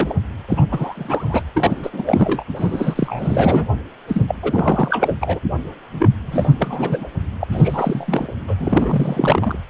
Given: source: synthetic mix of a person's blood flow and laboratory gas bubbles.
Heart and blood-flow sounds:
Doppler ultrasound of blood flow; precordium
0.00-0.15 s: bubbles
0.48-0.68 s: bubbles
0.71-1.43 s: bubbles
1.56-1.90 s: bubbles
1.93-2.04 s: bubbles
2.06-2.43 s: bubbles
2.56-3.67 s: bubbles
4.08-4.23 s: bubbles
4.27-4.35 s: bubbles
4.42-5.16 s: bubbles
5.21-5.39 s: bubbles
5.93-6.08 s: bubbles
6.26-6.55 s: bubbles
6.58-7.07 s: bubbles
7.39-7.45 s: bubbles
7.51-8.32 s: bubbles
8.48-8.55 s: bubbles
8.59-9.59 s: bubbles
From the record:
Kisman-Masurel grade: 343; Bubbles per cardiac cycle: rolling drumbeat, 9 or more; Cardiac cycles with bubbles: 100%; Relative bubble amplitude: loud (0.450 to 0.775); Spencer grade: 3 (all of the cardiac periods contain showers or single bubble signals, but not dominating or overriding the cardiac motion signals); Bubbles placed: anywhere in the cardiac cycle

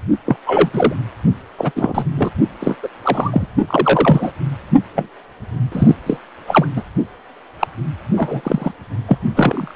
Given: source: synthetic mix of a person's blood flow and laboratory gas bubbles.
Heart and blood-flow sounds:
Doppler ultrasound of blood flow; precordium
0.25-0.36 s: bubbles
0.46-0.70 s: bubbles
0.73-0.95 s: bubbles
1.57-1.72 s: bubbles
1.75-2.05 s: bubbles
2.16-2.30 s: bubbles
2.60-2.75 s: bubbles
2.82-2.88 s: bubbles
3.04-3.46 s: bubbles
3.67-4.31 s: bubbles
4.95-5.08 s: bubbles
5.71-5.95 s: bubbles
6.06-6.17 s: bubbles
6.46-6.67 s: bubbles
6.76-6.82 s: bubbles
7.59-7.67 s: bubbles
8.17-8.71 s: bubbles
9.08-9.18 s: bubbles
9.35-9.76 s: bubbles
From the record:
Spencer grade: 3 (all of the cardiac periods contain showers or single bubble signals, but not dominating or overriding the cardiac motion signals); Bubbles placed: only in the low amplitude regions of the cardiac cycle

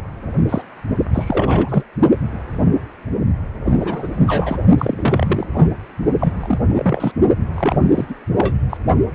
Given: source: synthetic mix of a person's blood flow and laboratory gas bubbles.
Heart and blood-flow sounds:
Doppler ultrasound of blood flow; precordium
0.49-0.62 s: bubbles
1.13-1.84 s: bubbles
3.65-3.72 s: bubbles
3.76-4.09 s: bubbles
4.26-4.57 s: bubbles
4.77-5.46 s: bubbles
5.52-5.71 s: bubbles
6.20-6.58 s: bubbles
6.67-7.12 s: bubbles
7.54-7.78 s: bubbles
7.94-8.04 s: bubbles
8.10-8.15 s: bubbles
8.38-8.55 s: bubbles
8.70-8.77 s: bubbles
From the record:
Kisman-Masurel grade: 232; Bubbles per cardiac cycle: several, 3 to 8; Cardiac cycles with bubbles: 50 to 99%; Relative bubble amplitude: moderate (0.250 to 0.450); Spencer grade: 3 (all of the cardiac periods contain showers or single bubble signals, but not dominating or overriding the cardiac motion signals); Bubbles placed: only in the low amplitude regions of the cardiac cycle

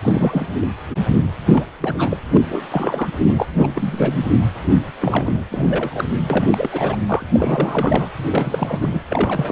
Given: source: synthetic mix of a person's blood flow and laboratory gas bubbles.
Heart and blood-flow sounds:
Doppler ultrasound of blood flow; precordium
0.02-0.47 s: bubbles
0.54-0.68 s: bubbles
1.08-1.18 s: bubbles
1.45-1.65 s: bubbles
1.80-2.18 s: bubbles
2.34-2.38 s: bubbles
2.49-2.65 s: bubbles
2.71-3.08 s: bubbles
3.17-3.47 s: bubbles
3.56-4.25 s: bubbles
5.01-5.43 s: bubbles
5.50-6.04 s: bubbles
6.29-6.96 s: bubbles
7.08-7.26 s: bubbles
7.30-8.08 s: bubbles
8.31-9.01 s: bubbles
9.11-9.52 s: bubbles
From the record:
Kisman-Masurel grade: 342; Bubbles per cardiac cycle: rolling drumbeat, 9 or more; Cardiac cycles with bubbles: 100%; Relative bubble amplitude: moderate (0.250 to 0.450); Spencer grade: 3 (all of the cardiac periods contain showers or single bubble signals, but not dominating or overriding the cardiac motion signals); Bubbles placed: anywhere in the cardiac cycle

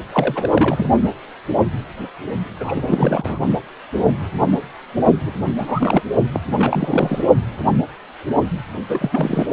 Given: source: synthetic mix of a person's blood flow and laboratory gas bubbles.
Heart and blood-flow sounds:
Doppler ultrasound of blood flow; precordium
0.12-0.50 s: bubbles
0.53-0.89 s: bubbles
2.59-3.39 s: bubbles
5.25-5.32 s: bubbles
5.58-6.02 s: bubbles
6.33-6.41 s: bubbles
6.58-7.24 s: bubbles
8.88-9.47 s: bubbles
From the record:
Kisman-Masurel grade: 332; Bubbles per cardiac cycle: rolling drumbeat, 9 or more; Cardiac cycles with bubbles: 50 to 99%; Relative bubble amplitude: moderate (0.250 to 0.450); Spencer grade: 3 (all of the cardiac periods contain showers or single bubble signals, but not dominating or overriding the cardiac motion signals); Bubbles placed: only in the low amplitude regions of the cardiac cycle

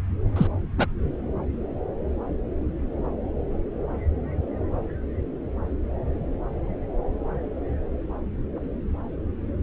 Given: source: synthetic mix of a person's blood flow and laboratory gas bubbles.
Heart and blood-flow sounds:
Doppler ultrasound of blood flow; subclavian vein
0.36-0.47 s: bubbles
0.78-0.87 s: bubbles
From the record:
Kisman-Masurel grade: 112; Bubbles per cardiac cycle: 1 to 2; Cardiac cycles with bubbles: 1 to 10%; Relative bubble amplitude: moderate (0.250 to 0.450); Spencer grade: 1 (occasional bubble signal discernible with the cardiac motion signal, with majority of cardiac periods free of bubbles); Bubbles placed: anywhere in the cardiac cycle

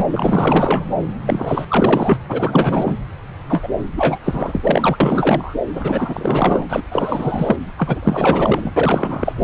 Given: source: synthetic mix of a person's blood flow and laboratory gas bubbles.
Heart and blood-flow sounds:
Doppler ultrasound of blood flow; subclavian vein
0.00-0.04 s: bubbles
0.10-0.85 s: bubbles
1.26-1.65 s: bubbles
1.68-2.19 s: bubbles
2.29-2.95 s: bubbles
3.48-3.68 s: bubbles
3.96-4.19 s: bubbles
4.24-4.98 s: bubbles
5.00-5.54 s: bubbles
5.75-6.66 s: bubbles
6.70-6.83 s: bubbles
6.92-7.57 s: bubbles
7.78-8.72 s: bubbles
8.76-9.32 s: bubbles
9.38-9.44 s: bubbles
From the record:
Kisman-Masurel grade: 444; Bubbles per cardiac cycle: continuous sound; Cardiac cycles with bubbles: 100%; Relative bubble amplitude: maximal (0.775 to 0.999); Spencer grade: 4 (maximum detectable bubble signal sounding continuously throughout systole and diastole of every cardiac period, and overriding the amplitude of the normal cardiac signals); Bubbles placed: anywhere in the cardiac cycle

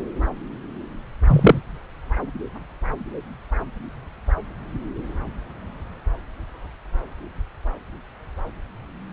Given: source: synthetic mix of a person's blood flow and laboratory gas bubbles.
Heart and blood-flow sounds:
Doppler ultrasound of blood flow; subclavian vein
1.27-1.60 s: bubbles
From the record:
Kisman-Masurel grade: 123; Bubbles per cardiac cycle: 1 to 2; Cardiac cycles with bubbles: 10 to 50%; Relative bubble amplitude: loud (0.450 to 0.775); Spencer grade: 2 (many but less than half of the cardiac periods contain bubble signals, singularly or in groups); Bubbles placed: anywhere in the cardiac cycle

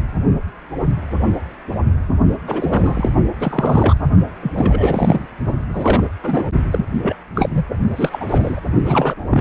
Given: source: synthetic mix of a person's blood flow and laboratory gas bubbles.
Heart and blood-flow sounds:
Doppler ultrasound of blood flow; precordium
2.47-3.11 s: bubbles
3.39-3.95 s: bubbles
4.42-4.52 s: bubbles
4.54-5.25 s: bubbles
5.69-6.08 s: bubbles
6.23-6.51 s: bubbles
6.71-6.86 s: bubbles
7.02-7.16 s: bubbles
7.35-7.63 s: bubbles
7.97-8.25 s: bubbles
8.29-8.59 s: bubbles
8.85-9.14 s: bubbles
9.30-9.41 s: bubbles
From the record:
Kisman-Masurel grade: 332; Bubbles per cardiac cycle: rolling drumbeat, 9 or more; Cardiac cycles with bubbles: 50 to 99%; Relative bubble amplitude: moderate (0.250 to 0.450); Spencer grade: 3 (all of the cardiac periods contain showers or single bubble signals, but not dominating or overriding the cardiac motion signals); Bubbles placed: only in the low amplitude regions of the cardiac cycle

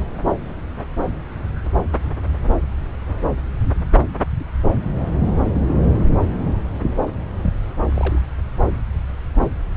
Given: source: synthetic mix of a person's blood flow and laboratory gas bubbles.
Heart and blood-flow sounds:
Doppler ultrasound of blood flow; subclavian vein
7.42-7.53 s: bubbles
7.89-8.20 s: bubbles
From the record:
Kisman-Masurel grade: 211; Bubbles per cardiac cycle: several, 3 to 8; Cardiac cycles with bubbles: 1 to 10%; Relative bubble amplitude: barely perceptible (0.100 to 0.250); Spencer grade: 1 (occasional bubble signal discernible with the cardiac motion signal, with majority of cardiac periods free of bubbles); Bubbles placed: anywhere in the cardiac cycle

